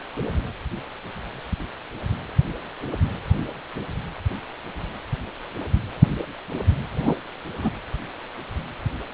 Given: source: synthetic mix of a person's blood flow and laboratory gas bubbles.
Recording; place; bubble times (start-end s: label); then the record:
Doppler ultrasound of blood flow; precordium
7.01-7.15 s: bubbles
7.52-7.72 s: bubbles
From the record:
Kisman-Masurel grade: 212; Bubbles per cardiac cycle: several, 3 to 8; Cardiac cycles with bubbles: 1 to 10%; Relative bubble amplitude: moderate (0.250 to 0.450); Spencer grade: 1 (occasional bubble signal discernible with the cardiac motion signal, with majority of cardiac periods free of bubbles); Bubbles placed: anywhere in the cardiac cycle